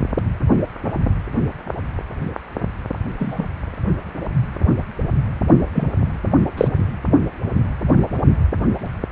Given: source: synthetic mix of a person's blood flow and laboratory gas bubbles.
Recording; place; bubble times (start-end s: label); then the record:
Doppler ultrasound of blood flow; precordium
3.19-3.46 s: bubbles
5.74-5.88 s: bubbles
6.57-6.68 s: bubbles
From the record:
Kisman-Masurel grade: 123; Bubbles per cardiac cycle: 1 to 2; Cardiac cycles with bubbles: 10 to 50%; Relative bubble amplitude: loud (0.450 to 0.775); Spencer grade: 2 (many but less than half of the cardiac periods contain bubble signals, singularly or in groups); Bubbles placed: only in the low amplitude regions of the cardiac cycle